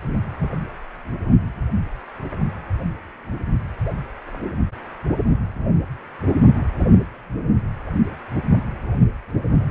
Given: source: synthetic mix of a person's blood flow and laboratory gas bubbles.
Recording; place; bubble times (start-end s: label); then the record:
Doppler ultrasound of blood flow; precordium
no bubbles
From the record:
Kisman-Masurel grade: 000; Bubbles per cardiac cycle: 0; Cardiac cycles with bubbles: 0%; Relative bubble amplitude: no bubbles discernible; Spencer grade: 0 (complete lack of bubble signals)